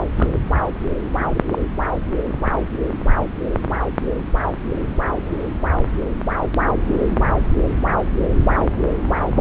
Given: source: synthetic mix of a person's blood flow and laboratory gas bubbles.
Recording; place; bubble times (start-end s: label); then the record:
Doppler ultrasound of blood flow; subclavian vein
0.17-0.28 s: bubbles
0.31-0.40 s: bubbles
1.19-1.40 s: bubbles
1.50-1.66 s: bubbles
From the record:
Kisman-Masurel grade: 212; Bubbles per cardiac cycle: several, 3 to 8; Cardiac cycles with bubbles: 1 to 10%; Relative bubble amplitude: moderate (0.250 to 0.450); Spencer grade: 1 (occasional bubble signal discernible with the cardiac motion signal, with majority of cardiac periods free of bubbles); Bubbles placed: anywhere in the cardiac cycle